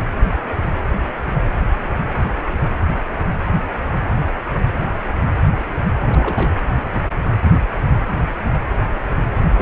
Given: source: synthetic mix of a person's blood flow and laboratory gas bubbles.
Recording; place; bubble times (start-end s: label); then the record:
Doppler ultrasound of blood flow; precordium
5.99-6.51 s: bubbles
9.39-9.51 s: bubbles
9.57-9.62 s: bubbles
From the record:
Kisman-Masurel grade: 211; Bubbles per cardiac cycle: several, 3 to 8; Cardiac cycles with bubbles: 1 to 10%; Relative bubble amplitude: barely perceptible (0.100 to 0.250); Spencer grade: 1 (occasional bubble signal discernible with the cardiac motion signal, with majority of cardiac periods free of bubbles); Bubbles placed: anywhere in the cardiac cycle